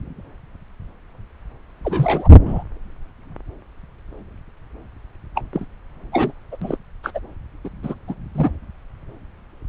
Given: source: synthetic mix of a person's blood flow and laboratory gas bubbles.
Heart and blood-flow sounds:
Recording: Doppler ultrasound of blood flow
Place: subclavian vein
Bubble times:
1.84-2.29 s: bubbles
2.45-2.63 s: bubbles
5.35-5.41 s: bubbles
5.53-5.65 s: bubbles
6.12-6.33 s: bubbles
6.52-6.57 s: bubbles
6.62-6.78 s: bubbles
7.03-7.12 s: bubbles
7.14-7.20 s: bubbles
7.64-7.69 s: bubbles
7.83-7.95 s: bubbles
8.08-8.14 s: bubbles
8.34-8.51 s: bubbles
From the record:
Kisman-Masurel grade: 222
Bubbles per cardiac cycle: several, 3 to 8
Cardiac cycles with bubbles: 10 to 50%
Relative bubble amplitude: moderate (0.250 to 0.450)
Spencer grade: 2 (many but less than half of the cardiac periods contain bubble signals, singularly or in groups)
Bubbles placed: anywhere in the cardiac cycle

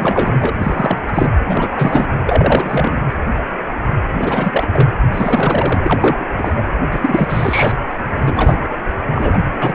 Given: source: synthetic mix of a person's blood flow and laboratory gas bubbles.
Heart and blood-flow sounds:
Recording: Doppler ultrasound of blood flow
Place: precordium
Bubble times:
0.00-0.53 s: bubbles
0.58-1.01 s: bubbles
1.07-1.11 s: bubbles
1.14-1.28 s: bubbles
1.47-1.70 s: bubbles
1.74-2.06 s: bubbles
2.25-3.02 s: bubbles
4.17-4.89 s: bubbles
5.12-5.81 s: bubbles
5.83-6.25 s: bubbles
6.38-6.63 s: bubbles
6.81-6.88 s: bubbles
6.92-7.74 s: bubbles
8.12-8.68 s: bubbles
9.14-9.38 s: bubbles
9.62-9.75 s: bubbles
From the record:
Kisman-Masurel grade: 333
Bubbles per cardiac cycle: rolling drumbeat, 9 or more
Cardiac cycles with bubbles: 50 to 99%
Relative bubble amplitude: loud (0.450 to 0.775)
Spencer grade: 3 (all of the cardiac periods contain showers or single bubble signals, but not dominating or overriding the cardiac motion signals)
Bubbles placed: anywhere in the cardiac cycle

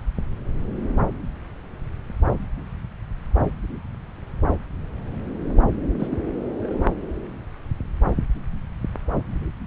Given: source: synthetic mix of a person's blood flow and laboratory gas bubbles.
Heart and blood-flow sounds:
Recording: Doppler ultrasound of blood flow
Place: subclavian vein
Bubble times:
6.00-6.08 s: bubbles
6.10-6.17 s: bubbles
6.40-6.58 s: bubbles
6.61-6.93 s: bubbles
From the record:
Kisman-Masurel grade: 211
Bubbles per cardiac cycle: several, 3 to 8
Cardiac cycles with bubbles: 1 to 10%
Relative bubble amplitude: barely perceptible (0.100 to 0.250)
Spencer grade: 1 (occasional bubble signal discernible with the cardiac motion signal, with majority of cardiac periods free of bubbles)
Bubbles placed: anywhere in the cardiac cycle

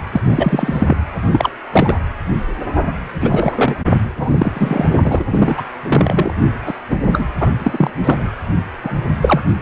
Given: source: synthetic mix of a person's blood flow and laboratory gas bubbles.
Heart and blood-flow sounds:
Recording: Doppler ultrasound of blood flow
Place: precordium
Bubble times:
0.12-0.21 s: bubbles
0.26-0.95 s: bubbles
1.32-1.50 s: bubbles
1.72-2.00 s: bubbles
3.19-3.77 s: bubbles
4.16-4.86 s: bubbles
4.92-5.24 s: bubbles
5.29-5.66 s: bubbles
5.83-6.31 s: bubbles
6.66-6.75 s: bubbles
6.89-6.97 s: bubbles
7.03-7.25 s: bubbles
7.40-7.50 s: bubbles
7.59-7.91 s: bubbles
8.04-8.31 s: bubbles
8.82-9.04 s: bubbles
9.21-9.42 s: bubbles
From the record:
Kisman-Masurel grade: 243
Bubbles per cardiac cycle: several, 3 to 8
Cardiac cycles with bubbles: 100%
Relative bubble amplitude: loud (0.450 to 0.775)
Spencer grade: 3 (all of the cardiac periods contain showers or single bubble signals, but not dominating or overriding the cardiac motion signals)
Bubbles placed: anywhere in the cardiac cycle

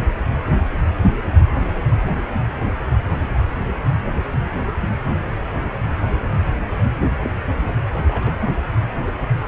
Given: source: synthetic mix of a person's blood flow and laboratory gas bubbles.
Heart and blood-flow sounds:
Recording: Doppler ultrasound of blood flow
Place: precordium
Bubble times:
7.20-7.30 s: bubbles
8.05-8.51 s: bubbles
From the record:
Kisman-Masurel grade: 121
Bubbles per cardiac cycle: 1 to 2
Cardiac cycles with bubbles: 10 to 50%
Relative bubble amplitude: barely perceptible (0.100 to 0.250)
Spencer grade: 2 (many but less than half of the cardiac periods contain bubble signals, singularly or in groups)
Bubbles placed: anywhere in the cardiac cycle

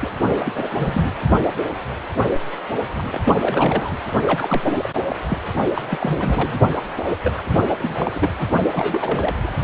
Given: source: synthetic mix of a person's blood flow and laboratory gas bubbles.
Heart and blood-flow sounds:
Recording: Doppler ultrasound of blood flow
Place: precordium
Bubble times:
0.00-0.08 s: bubbles
0.39-0.52 s: bubbles
0.55-1.12 s: bubbles
2.98-3.99 s: bubbles
4.27-4.62 s: bubbles
4.66-4.90 s: bubbles
4.94-5.01 s: bubbles
5.08-5.16 s: bubbles
5.29-5.38 s: bubbles
5.74-5.82 s: bubbles
5.91-6.59 s: bubbles
6.98-7.03 s: bubbles
7.23-7.32 s: bubbles
7.38-7.60 s: bubbles
7.78-8.30 s: bubbles
8.38-8.47 s: bubbles
8.71-9.35 s: bubbles
9.43-9.53 s: bubbles
From the record:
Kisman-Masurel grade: 332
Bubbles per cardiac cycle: rolling drumbeat, 9 or more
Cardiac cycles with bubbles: 50 to 99%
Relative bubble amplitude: moderate (0.250 to 0.450)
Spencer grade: 3 (all of the cardiac periods contain showers or single bubble signals, but not dominating or overriding the cardiac motion signals)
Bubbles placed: only in the low amplitude regions of the cardiac cycle

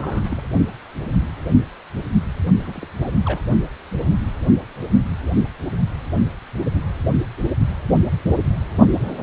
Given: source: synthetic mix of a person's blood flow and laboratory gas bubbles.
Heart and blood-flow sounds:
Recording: Doppler ultrasound of blood flow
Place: precordium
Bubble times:
0.00-0.41 s: bubbles
2.59-2.87 s: bubbles
3.01-3.10 s: bubbles
3.25-3.40 s: bubbles
From the record:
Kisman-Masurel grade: 221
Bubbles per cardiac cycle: several, 3 to 8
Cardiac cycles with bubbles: 10 to 50%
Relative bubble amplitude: barely perceptible (0.100 to 0.250)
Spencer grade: 2 (many but less than half of the cardiac periods contain bubble signals, singularly or in groups)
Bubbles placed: only in the low amplitude regions of the cardiac cycle

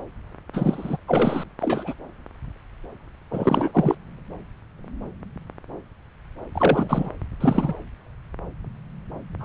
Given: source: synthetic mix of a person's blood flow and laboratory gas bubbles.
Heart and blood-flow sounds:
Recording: Doppler ultrasound of blood flow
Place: subclavian vein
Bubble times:
0.53-0.97 s: bubbles
1.08-1.44 s: bubbles
1.59-1.95 s: bubbles
3.31-3.95 s: bubbles
6.55-7.10 s: bubbles
7.41-7.73 s: bubbles
9.39-9.45 s: bubbles
From the record:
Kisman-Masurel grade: 222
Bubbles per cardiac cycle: several, 3 to 8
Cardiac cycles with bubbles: 10 to 50%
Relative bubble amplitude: moderate (0.250 to 0.450)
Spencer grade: 2 (many but less than half of the cardiac periods contain bubble signals, singularly or in groups)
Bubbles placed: anywhere in the cardiac cycle

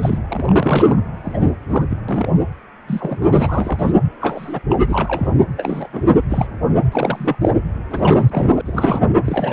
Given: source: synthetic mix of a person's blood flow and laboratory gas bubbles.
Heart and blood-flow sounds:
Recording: Doppler ultrasound of blood flow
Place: precordium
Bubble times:
0.01-0.18 s: bubbles
0.29-1.00 s: bubbles
1.24-1.51 s: bubbles
1.69-1.84 s: bubbles
1.90-1.98 s: bubbles
2.08-2.36 s: bubbles
2.88-3.29 s: bubbles
3.32-3.92 s: bubbles
4.21-4.61 s: bubbles
4.70-4.76 s: bubbles
4.89-5.44 s: bubbles
5.57-5.88 s: bubbles
5.92-6.05 s: bubbles
6.29-6.47 s: bubbles
6.92-7.36 s: bubbles
7.41-7.51 s: bubbles
7.90-8.62 s: bubbles
8.65-9.12 s: bubbles
9.24-9.53 s: bubbles
From the record:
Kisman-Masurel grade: 242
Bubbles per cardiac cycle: several, 3 to 8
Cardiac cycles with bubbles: 100%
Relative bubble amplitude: moderate (0.250 to 0.450)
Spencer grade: 3 (all of the cardiac periods contain showers or single bubble signals, but not dominating or overriding the cardiac motion signals)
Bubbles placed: anywhere in the cardiac cycle

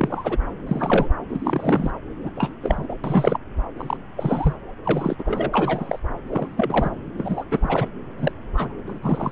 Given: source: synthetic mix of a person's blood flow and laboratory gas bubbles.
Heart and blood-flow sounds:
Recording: Doppler ultrasound of blood flow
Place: subclavian vein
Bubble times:
0.00-0.36 s: bubbles
0.65-1.08 s: bubbles
1.29-1.91 s: bubbles
2.22-2.29 s: bubbles
2.37-2.53 s: bubbles
2.63-2.87 s: bubbles
2.89-2.95 s: bubbles
3.04-3.38 s: bubbles
3.77-3.97 s: bubbles
4.17-4.54 s: bubbles
4.84-5.15 s: bubbles
5.18-5.50 s: bubbles
5.53-5.99 s: bubbles
6.29-6.53 s: bubbles
6.56-6.90 s: bubbles
7.17-7.44 s: bubbles
7.51-7.89 s: bubbles
8.18-8.32 s: bubbles
8.57-8.72 s: bubbles
8.87-8.99 s: bubbles
9.03-9.32 s: bubbles
From the record:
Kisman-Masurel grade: 242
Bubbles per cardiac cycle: several, 3 to 8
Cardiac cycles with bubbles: 100%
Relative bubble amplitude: moderate (0.250 to 0.450)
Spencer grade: 3 (all of the cardiac periods contain showers or single bubble signals, but not dominating or overriding the cardiac motion signals)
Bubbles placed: anywhere in the cardiac cycle

